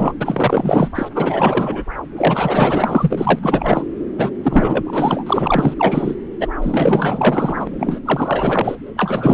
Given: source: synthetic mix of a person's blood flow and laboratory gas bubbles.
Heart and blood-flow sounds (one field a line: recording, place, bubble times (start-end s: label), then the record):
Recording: Doppler ultrasound of blood flow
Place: subclavian vein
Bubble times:
0.00-0.13 s: bubbles
0.20-0.91 s: bubbles
0.95-1.08 s: bubbles
1.15-1.85 s: bubbles
2.16-3.40 s: bubbles
3.43-3.84 s: bubbles
4.17-4.30 s: bubbles
4.43-5.24 s: bubbles
5.26-5.74 s: bubbles
5.78-6.16 s: bubbles
6.40-6.47 s: bubbles
6.61-7.68 s: bubbles
7.79-8.01 s: bubbles
8.05-8.75 s: bubbles
8.87-8.90 s: bubbles
8.96-9.34 s: bubbles
From the record:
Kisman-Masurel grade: 444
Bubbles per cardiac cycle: continuous sound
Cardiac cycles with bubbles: 100%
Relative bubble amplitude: maximal (0.775 to 0.999)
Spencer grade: 4 (maximum detectable bubble signal sounding continuously throughout systole and diastole of every cardiac period, and overriding the amplitude of the normal cardiac signals)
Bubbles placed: anywhere in the cardiac cycle